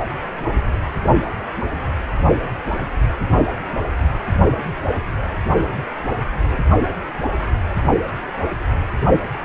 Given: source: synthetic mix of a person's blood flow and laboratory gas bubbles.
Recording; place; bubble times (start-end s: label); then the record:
Doppler ultrasound of blood flow; precordium
no bubbles
From the record:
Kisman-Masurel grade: 000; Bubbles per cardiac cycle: 0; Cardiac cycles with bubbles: 0%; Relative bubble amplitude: no bubbles discernible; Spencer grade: 0 (complete lack of bubble signals)